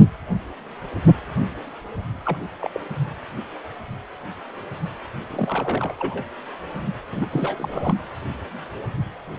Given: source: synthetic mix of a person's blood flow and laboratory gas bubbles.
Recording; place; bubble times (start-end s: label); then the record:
Doppler ultrasound of blood flow; precordium
2.25-2.37 s: bubbles
2.61-2.70 s: bubbles
2.74-2.80 s: bubbles
5.30-5.92 s: bubbles
5.98-6.23 s: bubbles
7.12-7.27 s: bubbles
7.30-7.95 s: bubbles
From the record:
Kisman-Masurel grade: 221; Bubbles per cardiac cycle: several, 3 to 8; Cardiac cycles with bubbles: 10 to 50%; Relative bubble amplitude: barely perceptible (0.100 to 0.250); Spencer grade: 2 (many but less than half of the cardiac periods contain bubble signals, singularly or in groups); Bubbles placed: anywhere in the cardiac cycle